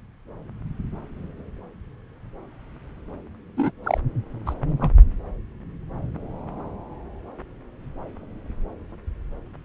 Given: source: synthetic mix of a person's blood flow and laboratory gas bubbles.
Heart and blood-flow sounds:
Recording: Doppler ultrasound of blood flow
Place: subclavian vein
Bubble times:
3.57-3.71 s: bubbles
3.83-4.01 s: bubbles
4.46-4.54 s: bubbles
4.81-4.91 s: bubbles
From the record:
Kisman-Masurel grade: 122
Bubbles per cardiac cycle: 1 to 2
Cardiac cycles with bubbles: 10 to 50%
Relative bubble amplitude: moderate (0.250 to 0.450)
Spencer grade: 2 (many but less than half of the cardiac periods contain bubble signals, singularly or in groups)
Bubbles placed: anywhere in the cardiac cycle

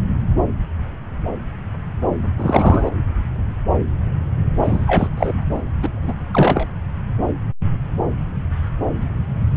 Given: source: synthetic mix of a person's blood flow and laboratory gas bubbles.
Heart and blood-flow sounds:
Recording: Doppler ultrasound of blood flow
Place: subclavian vein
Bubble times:
2.37-2.90 s: bubbles
4.63-5.08 s: bubbles
5.16-5.62 s: bubbles
5.82-5.89 s: bubbles
6.03-6.13 s: bubbles
6.33-6.67 s: bubbles
9.54-9.57 s: bubbles
From the record:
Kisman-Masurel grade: 223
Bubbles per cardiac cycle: several, 3 to 8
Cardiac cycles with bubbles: 10 to 50%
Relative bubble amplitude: loud (0.450 to 0.775)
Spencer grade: 2 (many but less than half of the cardiac periods contain bubble signals, singularly or in groups)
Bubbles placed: anywhere in the cardiac cycle

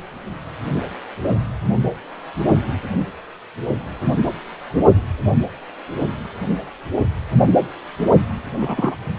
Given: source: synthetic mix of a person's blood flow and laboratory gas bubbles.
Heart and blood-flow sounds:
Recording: Doppler ultrasound of blood flow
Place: precordium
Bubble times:
8.56-8.95 s: bubbles
From the record:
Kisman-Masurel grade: 112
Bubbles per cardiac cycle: 1 to 2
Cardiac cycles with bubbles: 1 to 10%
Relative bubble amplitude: moderate (0.250 to 0.450)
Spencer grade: 1 (occasional bubble signal discernible with the cardiac motion signal, with majority of cardiac periods free of bubbles)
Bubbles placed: only in the low amplitude regions of the cardiac cycle

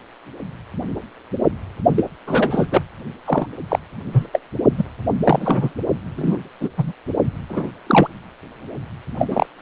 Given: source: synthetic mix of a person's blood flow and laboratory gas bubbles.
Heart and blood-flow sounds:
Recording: Doppler ultrasound of blood flow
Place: precordium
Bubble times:
1.96-2.05 s: bubbles
2.27-2.67 s: bubbles
2.71-2.82 s: bubbles
3.25-3.48 s: bubbles
3.68-3.79 s: bubbles
4.12-4.26 s: bubbles
4.33-4.40 s: bubbles
4.77-4.84 s: bubbles
5.24-5.75 s: bubbles
6.16-6.38 s: bubbles
6.60-6.71 s: bubbles
6.77-6.92 s: bubbles
7.50-7.71 s: bubbles
7.87-8.08 s: bubbles
9.19-9.46 s: bubbles
9.58-9.62 s: bubbles
From the record:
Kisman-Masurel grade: 233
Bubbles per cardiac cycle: several, 3 to 8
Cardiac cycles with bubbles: 50 to 99%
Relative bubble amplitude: loud (0.450 to 0.775)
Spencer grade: 3 (all of the cardiac periods contain showers or single bubble signals, but not dominating or overriding the cardiac motion signals)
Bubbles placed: only in the low amplitude regions of the cardiac cycle

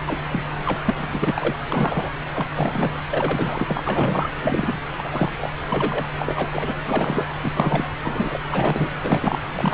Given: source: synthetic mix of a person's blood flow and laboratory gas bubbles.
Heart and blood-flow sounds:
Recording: Doppler ultrasound of blood flow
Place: subclavian vein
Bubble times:
0.07-0.18 s: bubbles
0.31-0.42 s: bubbles
0.65-0.79 s: bubbles
0.85-0.94 s: bubbles
0.97-1.08 s: bubbles
1.12-1.56 s: bubbles
1.72-2.11 s: bubbles
2.34-2.46 s: bubbles
2.56-2.91 s: bubbles
3.10-3.80 s: bubbles
3.85-4.30 s: bubbles
4.37-4.77 s: bubbles
4.97-5.31 s: bubbles
5.41-5.50 s: bubbles
5.69-6.04 s: bubbles
6.18-6.75 s: bubbles
6.84-7.25 s: bubbles
7.43-7.51 s: bubbles
7.54-7.84 s: bubbles
8.03-8.38 s: bubbles
8.50-8.88 s: bubbles
9.03-9.39 s: bubbles
9.54-9.74 s: bubbles
From the record:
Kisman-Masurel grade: 242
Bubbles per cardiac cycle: several, 3 to 8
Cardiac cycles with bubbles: 100%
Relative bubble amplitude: moderate (0.250 to 0.450)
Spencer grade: 3 (all of the cardiac periods contain showers or single bubble signals, but not dominating or overriding the cardiac motion signals)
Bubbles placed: anywhere in the cardiac cycle

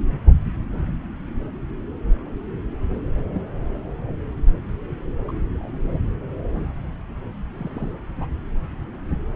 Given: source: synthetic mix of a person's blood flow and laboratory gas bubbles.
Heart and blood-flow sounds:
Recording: Doppler ultrasound of blood flow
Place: subclavian vein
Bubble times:
3.17-3.22 s: bubbles
3.33-3.43 s: bubbles
5.28-5.32 s: bubbles
5.55-5.99 s: bubbles
7.53-7.92 s: bubbles
8.20-8.26 s: bubbles
From the record:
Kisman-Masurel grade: 121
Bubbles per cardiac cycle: 1 to 2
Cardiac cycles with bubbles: 10 to 50%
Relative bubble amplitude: barely perceptible (0.100 to 0.250)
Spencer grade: 2 (many but less than half of the cardiac periods contain bubble signals, singularly or in groups)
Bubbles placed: anywhere in the cardiac cycle

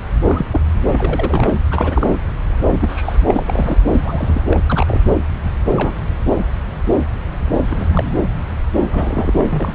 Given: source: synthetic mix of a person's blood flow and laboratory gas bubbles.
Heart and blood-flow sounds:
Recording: Doppler ultrasound of blood flow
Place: subclavian vein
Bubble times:
0.21-0.46 s: bubbles
0.52-0.61 s: bubbles
0.92-1.59 s: bubbles
1.71-2.17 s: bubbles
2.67-3.17 s: bubbles
3.28-3.77 s: bubbles
3.92-4.42 s: bubbles
4.51-4.62 s: bubbles
4.67-5.01 s: bubbles
5.72-5.93 s: bubbles
7.70-7.76 s: bubbles
7.80-7.85 s: bubbles
7.92-8.20 s: bubbles
8.90-9.45 s: bubbles
9.48-9.75 s: bubbles
From the record:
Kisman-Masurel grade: 232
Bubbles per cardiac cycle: several, 3 to 8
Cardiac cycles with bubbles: 50 to 99%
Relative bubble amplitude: moderate (0.250 to 0.450)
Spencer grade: 3 (all of the cardiac periods contain showers or single bubble signals, but not dominating or overriding the cardiac motion signals)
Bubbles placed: anywhere in the cardiac cycle

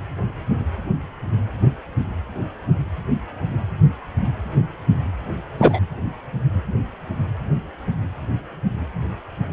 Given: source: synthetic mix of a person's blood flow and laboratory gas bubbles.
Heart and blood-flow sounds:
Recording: Doppler ultrasound of blood flow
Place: precordium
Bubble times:
5.58-5.79 s: bubbles
From the record:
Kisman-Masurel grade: 123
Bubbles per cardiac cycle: 1 to 2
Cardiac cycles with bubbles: 10 to 50%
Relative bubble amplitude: loud (0.450 to 0.775)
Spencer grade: 2 (many but less than half of the cardiac periods contain bubble signals, singularly or in groups)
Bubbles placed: anywhere in the cardiac cycle

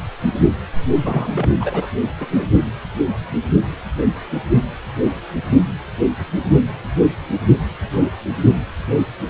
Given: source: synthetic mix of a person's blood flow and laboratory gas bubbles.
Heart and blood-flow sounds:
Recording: Doppler ultrasound of blood flow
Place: precordium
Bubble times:
1.03-1.50 s: bubbles
1.60-1.88 s: bubbles
2.20-2.27 s: bubbles
2.30-2.46 s: bubbles
From the record:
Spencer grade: 2 (many but less than half of the cardiac periods contain bubble signals, singularly or in groups)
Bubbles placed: anywhere in the cardiac cycle

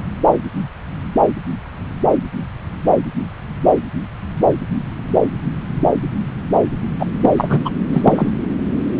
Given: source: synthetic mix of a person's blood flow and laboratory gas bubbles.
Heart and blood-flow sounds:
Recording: Doppler ultrasound of blood flow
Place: subclavian vein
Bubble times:
6.99-7.06 s: bubbles
7.21-7.29 s: bubbles
7.37-7.59 s: bubbles
7.64-7.70 s: bubbles
7.92-8.02 s: bubbles
8.05-8.32 s: bubbles
From the record:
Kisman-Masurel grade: 213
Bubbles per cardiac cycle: several, 3 to 8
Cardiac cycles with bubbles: 1 to 10%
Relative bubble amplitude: loud (0.450 to 0.775)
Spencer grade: 1 (occasional bubble signal discernible with the cardiac motion signal, with majority of cardiac periods free of bubbles)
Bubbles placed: anywhere in the cardiac cycle

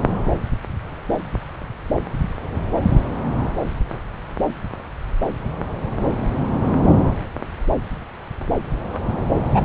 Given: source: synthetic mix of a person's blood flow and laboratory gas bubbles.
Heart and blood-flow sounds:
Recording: Doppler ultrasound of blood flow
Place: subclavian vein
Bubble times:
9.51-9.61 s: bubbles
From the record:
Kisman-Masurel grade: 113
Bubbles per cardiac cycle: 1 to 2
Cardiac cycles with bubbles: 1 to 10%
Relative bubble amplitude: loud (0.450 to 0.775)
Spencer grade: 1 (occasional bubble signal discernible with the cardiac motion signal, with majority of cardiac periods free of bubbles)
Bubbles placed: anywhere in the cardiac cycle

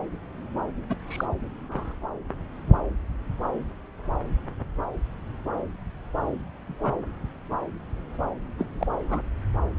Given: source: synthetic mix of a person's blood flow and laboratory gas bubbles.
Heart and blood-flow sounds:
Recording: Doppler ultrasound of blood flow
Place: subclavian vein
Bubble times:
0.89-0.94 s: bubbles
1.08-1.26 s: bubbles
1.69-1.95 s: bubbles
6.67-6.94 s: bubbles
8.58-8.65 s: bubbles
8.79-8.87 s: bubbles
9.09-9.19 s: bubbles
From the record:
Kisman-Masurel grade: 121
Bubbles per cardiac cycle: 1 to 2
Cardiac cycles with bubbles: 10 to 50%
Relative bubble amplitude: barely perceptible (0.100 to 0.250)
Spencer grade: 2 (many but less than half of the cardiac periods contain bubble signals, singularly or in groups)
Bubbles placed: anywhere in the cardiac cycle

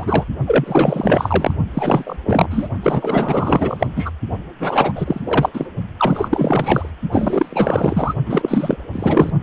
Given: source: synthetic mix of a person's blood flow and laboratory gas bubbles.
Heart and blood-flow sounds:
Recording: Doppler ultrasound of blood flow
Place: precordium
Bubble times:
0.00-0.24 s: bubbles
0.46-1.54 s: bubbles
1.73-2.17 s: bubbles
2.25-2.68 s: bubbles
2.83-3.87 s: bubbles
3.96-4.11 s: bubbles
4.59-4.92 s: bubbles
4.95-5.21 s: bubbles
5.24-5.50 s: bubbles
5.54-5.67 s: bubbles
5.97-6.91 s: bubbles
7.12-8.14 s: bubbles
8.26-8.77 s: bubbles
8.93-9.30 s: bubbles
From the record:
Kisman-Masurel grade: 444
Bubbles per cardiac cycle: continuous sound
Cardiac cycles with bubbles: 100%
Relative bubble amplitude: maximal (0.775 to 0.999)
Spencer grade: 4 (maximum detectable bubble signal sounding continuously throughout systole and diastole of every cardiac period, and overriding the amplitude of the normal cardiac signals)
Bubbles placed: only in the low amplitude regions of the cardiac cycle

